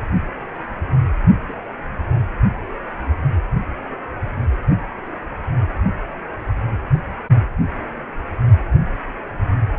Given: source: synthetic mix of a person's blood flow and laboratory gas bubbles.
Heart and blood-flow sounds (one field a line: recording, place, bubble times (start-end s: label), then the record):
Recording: Doppler ultrasound of blood flow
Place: precordium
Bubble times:
1.49-1.53 s: bubbles
From the record:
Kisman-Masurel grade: 111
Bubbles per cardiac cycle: 1 to 2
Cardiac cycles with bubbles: 1 to 10%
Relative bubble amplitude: barely perceptible (0.100 to 0.250)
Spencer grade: 1 (occasional bubble signal discernible with the cardiac motion signal, with majority of cardiac periods free of bubbles)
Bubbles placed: only in the low amplitude regions of the cardiac cycle